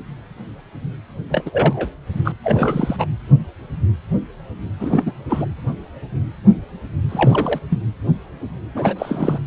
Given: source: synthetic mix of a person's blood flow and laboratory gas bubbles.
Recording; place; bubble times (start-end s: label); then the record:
Doppler ultrasound of blood flow; precordium
1.30-1.88 s: bubbles
2.25-2.32 s: bubbles
2.44-3.06 s: bubbles
4.79-5.12 s: bubbles
5.29-5.46 s: bubbles
7.09-7.60 s: bubbles
7.70-7.82 s: bubbles
8.74-8.94 s: bubbles
8.98-9.39 s: bubbles
From the record:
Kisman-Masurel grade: 222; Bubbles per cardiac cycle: several, 3 to 8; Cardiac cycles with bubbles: 10 to 50%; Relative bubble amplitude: moderate (0.250 to 0.450); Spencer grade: 2 (many but less than half of the cardiac periods contain bubble signals, singularly or in groups); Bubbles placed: anywhere in the cardiac cycle